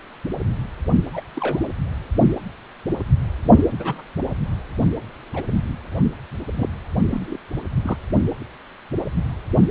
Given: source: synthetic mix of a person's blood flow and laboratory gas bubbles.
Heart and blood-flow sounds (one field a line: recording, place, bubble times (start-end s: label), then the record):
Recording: Doppler ultrasound of blood flow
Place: precordium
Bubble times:
1.13-1.21 s: bubbles
1.35-1.63 s: bubbles
3.44-3.62 s: bubbles
3.78-4.02 s: bubbles
5.33-5.42 s: bubbles
6.56-6.69 s: bubbles
7.10-7.38 s: bubbles
7.83-7.97 s: bubbles
From the record:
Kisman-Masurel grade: 121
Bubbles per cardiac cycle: 1 to 2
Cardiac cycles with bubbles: 10 to 50%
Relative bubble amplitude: barely perceptible (0.100 to 0.250)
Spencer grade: 2 (many but less than half of the cardiac periods contain bubble signals, singularly or in groups)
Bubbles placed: anywhere in the cardiac cycle